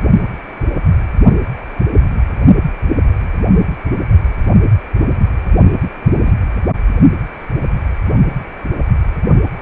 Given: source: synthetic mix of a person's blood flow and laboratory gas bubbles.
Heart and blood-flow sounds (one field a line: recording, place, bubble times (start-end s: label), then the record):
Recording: Doppler ultrasound of blood flow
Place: precordium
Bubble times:
6.24-6.31 s: bubbles
From the record:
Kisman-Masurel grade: 112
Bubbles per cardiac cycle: 1 to 2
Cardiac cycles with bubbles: 1 to 10%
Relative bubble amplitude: moderate (0.250 to 0.450)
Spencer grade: 1 (occasional bubble signal discernible with the cardiac motion signal, with majority of cardiac periods free of bubbles)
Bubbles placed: only in the low amplitude regions of the cardiac cycle